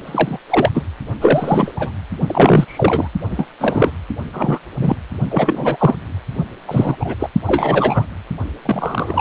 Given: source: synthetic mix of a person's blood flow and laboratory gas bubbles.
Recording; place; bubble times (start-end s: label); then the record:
Doppler ultrasound of blood flow; precordium
0.06-0.38 s: bubbles
0.49-0.70 s: bubbles
0.74-0.82 s: bubbles
1.21-1.72 s: bubbles
1.76-1.91 s: bubbles
2.26-3.09 s: bubbles
3.30-3.46 s: bubbles
3.59-3.91 s: bubbles
4.33-4.59 s: bubbles
4.80-4.96 s: bubbles
5.30-5.95 s: bubbles
6.67-6.96 s: bubbles
7.00-7.16 s: bubbles
7.19-7.29 s: bubbles
7.46-8.06 s: bubbles
8.62-9.21 s: bubbles
From the record:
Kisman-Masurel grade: 243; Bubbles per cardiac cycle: several, 3 to 8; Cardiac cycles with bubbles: 100%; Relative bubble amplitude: loud (0.450 to 0.775); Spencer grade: 3 (all of the cardiac periods contain showers or single bubble signals, but not dominating or overriding the cardiac motion signals); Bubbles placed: only in the low amplitude regions of the cardiac cycle